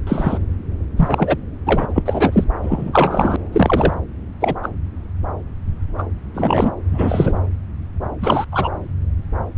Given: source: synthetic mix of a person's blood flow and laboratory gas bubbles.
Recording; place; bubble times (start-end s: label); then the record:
Doppler ultrasound of blood flow; subclavian vein
0.07-0.38 s: bubbles
0.96-1.36 s: bubbles
1.66-1.92 s: bubbles
1.95-2.03 s: bubbles
2.05-2.44 s: bubbles
2.62-3.36 s: bubbles
3.52-3.94 s: bubbles
4.39-4.54 s: bubbles
4.62-4.69 s: bubbles
5.98-6.03 s: bubbles
6.34-6.71 s: bubbles
6.91-7.38 s: bubbles
8.21-8.45 s: bubbles
8.52-8.71 s: bubbles
From the record:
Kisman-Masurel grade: 233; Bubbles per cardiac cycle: several, 3 to 8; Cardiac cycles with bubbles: 50 to 99%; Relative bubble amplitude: loud (0.450 to 0.775); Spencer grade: 3 (all of the cardiac periods contain showers or single bubble signals, but not dominating or overriding the cardiac motion signals); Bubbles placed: anywhere in the cardiac cycle